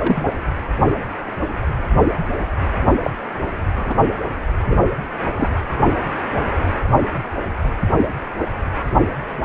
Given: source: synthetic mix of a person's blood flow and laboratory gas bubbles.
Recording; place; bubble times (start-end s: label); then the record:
Doppler ultrasound of blood flow; precordium
0.00-0.32 s: bubbles
3.02-3.10 s: bubbles
3.75-3.95 s: bubbles
4.68-4.79 s: bubbles
5.36-5.50 s: bubbles
From the record:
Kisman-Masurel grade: 122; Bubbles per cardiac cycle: 1 to 2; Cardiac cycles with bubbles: 10 to 50%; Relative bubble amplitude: moderate (0.250 to 0.450); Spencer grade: 2 (many but less than half of the cardiac periods contain bubble signals, singularly or in groups); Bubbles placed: anywhere in the cardiac cycle